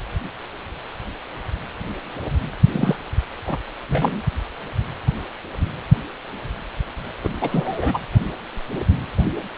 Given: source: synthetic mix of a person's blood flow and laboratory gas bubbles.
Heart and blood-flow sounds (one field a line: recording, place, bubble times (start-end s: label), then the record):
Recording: Doppler ultrasound of blood flow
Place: precordium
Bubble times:
2.72-2.99 s: bubbles
3.47-3.58 s: bubbles
3.89-4.22 s: bubbles
7.23-7.36 s: bubbles
7.41-7.98 s: bubbles
From the record:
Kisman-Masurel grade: 223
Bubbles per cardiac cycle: several, 3 to 8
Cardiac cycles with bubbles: 10 to 50%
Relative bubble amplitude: loud (0.450 to 0.775)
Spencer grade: 2 (many but less than half of the cardiac periods contain bubble signals, singularly or in groups)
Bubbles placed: anywhere in the cardiac cycle